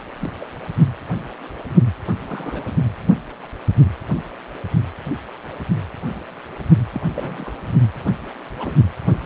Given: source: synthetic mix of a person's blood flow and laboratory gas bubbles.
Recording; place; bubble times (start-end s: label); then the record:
Doppler ultrasound of blood flow; precordium
0.21-0.30 s: bubbles
0.41-0.45 s: bubbles
2.29-2.65 s: bubbles
6.92-7.02 s: bubbles
7.14-7.52 s: bubbles
8.06-8.11 s: bubbles
8.60-8.74 s: bubbles
From the record:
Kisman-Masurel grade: 221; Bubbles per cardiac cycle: several, 3 to 8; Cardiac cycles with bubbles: 10 to 50%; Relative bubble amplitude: barely perceptible (0.100 to 0.250); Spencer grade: 2 (many but less than half of the cardiac periods contain bubble signals, singularly or in groups); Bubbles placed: anywhere in the cardiac cycle